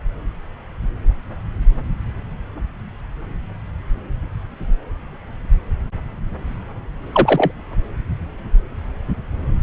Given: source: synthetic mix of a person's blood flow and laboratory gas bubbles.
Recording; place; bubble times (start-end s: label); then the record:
Doppler ultrasound of blood flow; subclavian vein
7.12-7.51 s: bubbles
From the record:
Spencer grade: 1 (occasional bubble signal discernible with the cardiac motion signal, with majority of cardiac periods free of bubbles); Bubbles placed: anywhere in the cardiac cycle